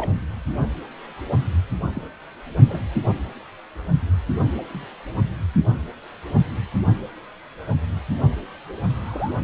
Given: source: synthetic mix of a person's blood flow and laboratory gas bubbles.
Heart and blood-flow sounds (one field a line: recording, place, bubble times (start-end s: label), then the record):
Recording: Doppler ultrasound of blood flow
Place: precordium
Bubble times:
0.00-0.11 s: bubbles
1.94-2.02 s: bubbles
2.69-2.81 s: bubbles
4.73-4.88 s: bubbles
8.90-9.40 s: bubbles
From the record:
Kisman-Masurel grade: 121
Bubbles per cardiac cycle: 1 to 2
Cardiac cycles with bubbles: 10 to 50%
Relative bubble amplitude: barely perceptible (0.100 to 0.250)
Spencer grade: 2 (many but less than half of the cardiac periods contain bubble signals, singularly or in groups)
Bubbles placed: anywhere in the cardiac cycle